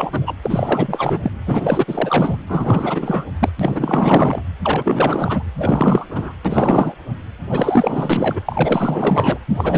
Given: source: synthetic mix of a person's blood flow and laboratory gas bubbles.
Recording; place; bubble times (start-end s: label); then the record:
Doppler ultrasound of blood flow; precordium
0.00-0.34 s: bubbles
0.43-1.20 s: bubbles
1.23-1.32 s: bubbles
1.46-1.84 s: bubbles
1.87-2.36 s: bubbles
2.48-3.25 s: bubbles
3.39-3.49 s: bubbles
3.59-4.43 s: bubbles
4.64-5.43 s: bubbles
5.58-6.05 s: bubbles
6.08-6.33 s: bubbles
6.45-6.94 s: bubbles
7.50-8.42 s: bubbles
8.48-9.38 s: bubbles
9.50-9.78 s: bubbles
From the record:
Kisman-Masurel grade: 444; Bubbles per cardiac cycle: continuous sound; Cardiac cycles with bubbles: 100%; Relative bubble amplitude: maximal (0.775 to 0.999); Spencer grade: 4 (maximum detectable bubble signal sounding continuously throughout systole and diastole of every cardiac period, and overriding the amplitude of the normal cardiac signals); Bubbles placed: anywhere in the cardiac cycle